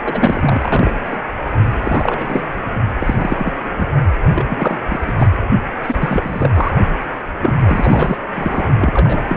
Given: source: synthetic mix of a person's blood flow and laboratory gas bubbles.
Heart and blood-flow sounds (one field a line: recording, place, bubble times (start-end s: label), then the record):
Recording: Doppler ultrasound of blood flow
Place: precordium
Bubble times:
0.05-0.94 s: bubbles
1.04-1.22 s: bubbles
1.82-2.45 s: bubbles
3.00-3.15 s: bubbles
3.17-3.52 s: bubbles
3.79-3.87 s: bubbles
4.26-4.77 s: bubbles
4.89-4.98 s: bubbles
5.06-5.13 s: bubbles
5.17-5.26 s: bubbles
5.83-5.96 s: bubbles
6.00-6.71 s: bubbles
7.40-7.54 s: bubbles
7.65-8.17 s: bubbles
8.34-8.71 s: bubbles
8.79-9.36 s: bubbles
From the record:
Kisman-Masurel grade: 342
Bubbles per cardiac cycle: rolling drumbeat, 9 or more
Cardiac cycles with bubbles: 100%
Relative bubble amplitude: moderate (0.250 to 0.450)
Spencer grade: 3 (all of the cardiac periods contain showers or single bubble signals, but not dominating or overriding the cardiac motion signals)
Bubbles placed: only in the low amplitude regions of the cardiac cycle